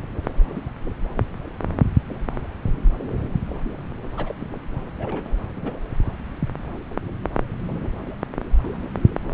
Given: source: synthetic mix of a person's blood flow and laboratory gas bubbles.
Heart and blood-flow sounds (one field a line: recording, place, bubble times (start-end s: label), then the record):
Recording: Doppler ultrasound of blood flow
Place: subclavian vein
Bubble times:
4.17-4.34 s: bubbles
4.40-4.46 s: bubbles
4.98-5.35 s: bubbles
5.56-5.71 s: bubbles
From the record:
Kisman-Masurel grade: 211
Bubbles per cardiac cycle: several, 3 to 8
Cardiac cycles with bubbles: 1 to 10%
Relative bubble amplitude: barely perceptible (0.100 to 0.250)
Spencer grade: 1 (occasional bubble signal discernible with the cardiac motion signal, with majority of cardiac periods free of bubbles)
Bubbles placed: anywhere in the cardiac cycle